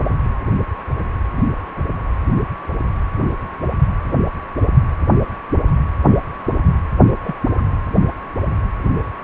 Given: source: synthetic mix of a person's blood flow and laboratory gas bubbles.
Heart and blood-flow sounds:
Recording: Doppler ultrasound of blood flow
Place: precordium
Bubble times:
7.23-7.35 s: bubbles
7.58-7.62 s: bubbles
From the record:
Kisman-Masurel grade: 122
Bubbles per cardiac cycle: 1 to 2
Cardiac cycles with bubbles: 10 to 50%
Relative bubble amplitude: moderate (0.250 to 0.450)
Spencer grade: 2 (many but less than half of the cardiac periods contain bubble signals, singularly or in groups)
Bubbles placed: anywhere in the cardiac cycle

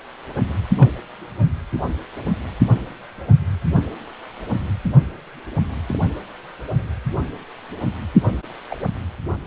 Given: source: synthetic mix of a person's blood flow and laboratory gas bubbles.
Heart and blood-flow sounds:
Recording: Doppler ultrasound of blood flow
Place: precordium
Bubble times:
0.77-0.91 s: bubbles
5.88-5.97 s: bubbles
8.31-8.37 s: bubbles
8.71-8.77 s: bubbles
From the record:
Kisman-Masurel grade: 121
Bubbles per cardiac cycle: 1 to 2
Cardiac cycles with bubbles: 10 to 50%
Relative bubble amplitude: barely perceptible (0.100 to 0.250)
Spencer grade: 2 (many but less than half of the cardiac periods contain bubble signals, singularly or in groups)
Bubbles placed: anywhere in the cardiac cycle

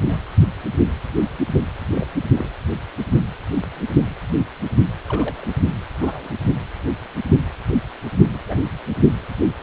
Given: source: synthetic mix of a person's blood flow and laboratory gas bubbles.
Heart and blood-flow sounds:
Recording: Doppler ultrasound of blood flow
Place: precordium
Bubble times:
0.00-0.20 s: bubbles
1.94-2.05 s: bubbles
2.34-2.48 s: bubbles
5.08-5.48 s: bubbles
6.01-6.28 s: bubbles
8.34-8.38 s: bubbles
8.46-8.59 s: bubbles
From the record:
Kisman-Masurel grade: 121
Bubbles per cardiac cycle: 1 to 2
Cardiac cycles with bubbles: 10 to 50%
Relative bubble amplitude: barely perceptible (0.100 to 0.250)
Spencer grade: 2 (many but less than half of the cardiac periods contain bubble signals, singularly or in groups)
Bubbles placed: only in the low amplitude regions of the cardiac cycle

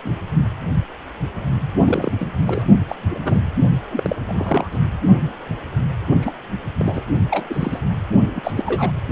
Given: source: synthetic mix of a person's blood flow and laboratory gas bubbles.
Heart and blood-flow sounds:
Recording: Doppler ultrasound of blood flow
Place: precordium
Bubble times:
0.04-0.10 s: bubbles
1.85-2.12 s: bubbles
2.19-2.27 s: bubbles
2.46-2.66 s: bubbles
2.88-2.96 s: bubbles
3.10-3.41 s: bubbles
3.91-4.16 s: bubbles
4.28-4.67 s: bubbles
4.71-4.79 s: bubbles
6.21-6.33 s: bubbles
6.79-7.02 s: bubbles
7.30-7.46 s: bubbles
7.50-7.80 s: bubbles
8.35-8.52 s: bubbles
8.56-8.91 s: bubbles
From the record:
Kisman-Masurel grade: 232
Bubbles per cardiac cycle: several, 3 to 8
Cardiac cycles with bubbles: 50 to 99%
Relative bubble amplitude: moderate (0.250 to 0.450)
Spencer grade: 3 (all of the cardiac periods contain showers or single bubble signals, but not dominating or overriding the cardiac motion signals)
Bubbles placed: only in the low amplitude regions of the cardiac cycle

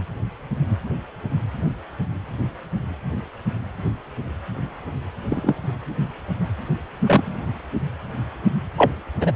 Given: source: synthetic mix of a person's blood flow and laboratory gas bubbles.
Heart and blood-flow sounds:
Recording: Doppler ultrasound of blood flow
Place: precordium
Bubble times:
5.30-5.54 s: bubbles
7.05-7.44 s: bubbles
8.76-8.91 s: bubbles
9.21-9.31 s: bubbles
From the record:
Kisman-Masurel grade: 123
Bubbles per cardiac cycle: 1 to 2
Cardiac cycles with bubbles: 10 to 50%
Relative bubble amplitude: loud (0.450 to 0.775)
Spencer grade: 2 (many but less than half of the cardiac periods contain bubble signals, singularly or in groups)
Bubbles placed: anywhere in the cardiac cycle

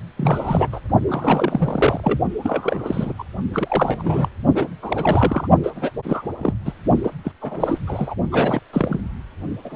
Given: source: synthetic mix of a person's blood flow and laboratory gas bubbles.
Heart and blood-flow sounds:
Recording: Doppler ultrasound of blood flow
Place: precordium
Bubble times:
0.17-0.68 s: bubbles
0.72-0.80 s: bubbles
1.07-2.19 s: bubbles
2.43-3.13 s: bubbles
3.19-3.24 s: bubbles
3.53-4.29 s: bubbles
4.54-4.68 s: bubbles
4.82-5.48 s: bubbles
5.63-5.71 s: bubbles
5.75-5.91 s: bubbles
6.04-6.32 s: bubbles
6.38-6.53 s: bubbles
6.65-6.73 s: bubbles
7.04-7.11 s: bubbles
7.24-7.32 s: bubbles
7.41-7.79 s: bubbles
7.87-8.14 s: bubbles
8.31-8.60 s: bubbles
8.73-9.00 s: bubbles
9.64-9.76 s: bubbles
From the record:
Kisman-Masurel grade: 342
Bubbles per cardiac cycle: rolling drumbeat, 9 or more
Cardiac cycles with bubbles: 100%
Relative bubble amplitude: moderate (0.250 to 0.450)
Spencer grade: 3 (all of the cardiac periods contain showers or single bubble signals, but not dominating or overriding the cardiac motion signals)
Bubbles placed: only in the low amplitude regions of the cardiac cycle

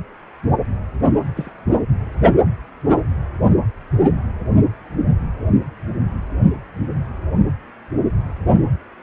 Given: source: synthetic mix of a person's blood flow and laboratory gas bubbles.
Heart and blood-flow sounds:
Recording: Doppler ultrasound of blood flow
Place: precordium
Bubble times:
1.12-1.20 s: bubbles
1.36-1.51 s: bubbles
From the record:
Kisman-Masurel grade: 111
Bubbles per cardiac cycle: 1 to 2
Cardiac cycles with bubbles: 1 to 10%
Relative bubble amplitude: barely perceptible (0.100 to 0.250)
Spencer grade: 1 (occasional bubble signal discernible with the cardiac motion signal, with majority of cardiac periods free of bubbles)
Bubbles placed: anywhere in the cardiac cycle

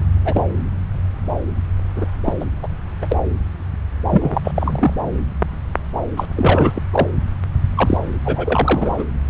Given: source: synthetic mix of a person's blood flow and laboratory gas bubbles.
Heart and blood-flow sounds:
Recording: Doppler ultrasound of blood flow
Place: subclavian vein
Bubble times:
0.25-0.46 s: bubbles
1.96-2.06 s: bubbles
2.24-2.33 s: bubbles
2.40-2.45 s: bubbles
2.62-2.67 s: bubbles
3.01-3.19 s: bubbles
4.10-4.42 s: bubbles
4.44-4.52 s: bubbles
4.54-4.94 s: bubbles
6.16-6.25 s: bubbles
6.35-6.82 s: bubbles
6.92-7.08 s: bubbles
7.77-7.98 s: bubbles
8.25-9.04 s: bubbles
From the record:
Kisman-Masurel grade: 232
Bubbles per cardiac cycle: several, 3 to 8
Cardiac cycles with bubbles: 50 to 99%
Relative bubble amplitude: moderate (0.250 to 0.450)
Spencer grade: 3 (all of the cardiac periods contain showers or single bubble signals, but not dominating or overriding the cardiac motion signals)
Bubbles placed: anywhere in the cardiac cycle

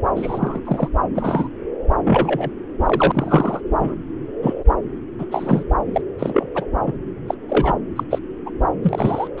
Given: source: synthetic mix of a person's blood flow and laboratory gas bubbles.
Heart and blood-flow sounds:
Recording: Doppler ultrasound of blood flow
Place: subclavian vein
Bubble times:
0.15-0.60 s: bubbles
0.65-0.89 s: bubbles
1.14-1.48 s: bubbles
2.04-2.50 s: bubbles
2.84-3.60 s: bubbles
3.79-3.95 s: bubbles
4.42-4.54 s: bubbles
5.18-5.25 s: bubbles
5.31-5.63 s: bubbles
5.93-6.01 s: bubbles
6.19-6.46 s: bubbles
6.54-6.65 s: bubbles
6.86-6.94 s: bubbles
7.28-7.34 s: bubbles
7.48-7.74 s: bubbles
7.95-8.04 s: bubbles
8.10-8.19 s: bubbles
8.46-8.50 s: bubbles
8.83-9.28 s: bubbles
9.38-9.40 s: bubbles
From the record:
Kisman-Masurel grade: 243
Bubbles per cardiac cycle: several, 3 to 8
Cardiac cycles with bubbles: 100%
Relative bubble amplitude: loud (0.450 to 0.775)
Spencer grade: 3 (all of the cardiac periods contain showers or single bubble signals, but not dominating or overriding the cardiac motion signals)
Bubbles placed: anywhere in the cardiac cycle

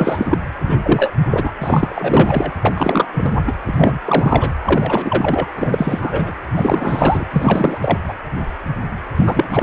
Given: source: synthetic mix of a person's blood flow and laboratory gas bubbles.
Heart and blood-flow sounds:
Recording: Doppler ultrasound of blood flow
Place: precordium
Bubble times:
0.00-0.38 s: bubbles
0.65-0.78 s: bubbles
0.82-1.11 s: bubbles
1.31-1.52 s: bubbles
1.61-2.51 s: bubbles
2.62-3.05 s: bubbles
3.13-3.42 s: bubbles
3.47-3.53 s: bubbles
3.67-4.00 s: bubbles
4.05-4.50 s: bubbles
4.64-5.46 s: bubbles
5.57-6.33 s: bubbles
6.52-7.25 s: bubbles
7.33-7.77 s: bubbles
7.81-7.97 s: bubbles
8.08-8.13 s: bubbles
9.16-9.48 s: bubbles
9.51-9.63 s: bubbles
From the record:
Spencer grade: 3 (all of the cardiac periods contain showers or single bubble signals, but not dominating or overriding the cardiac motion signals)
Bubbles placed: anywhere in the cardiac cycle

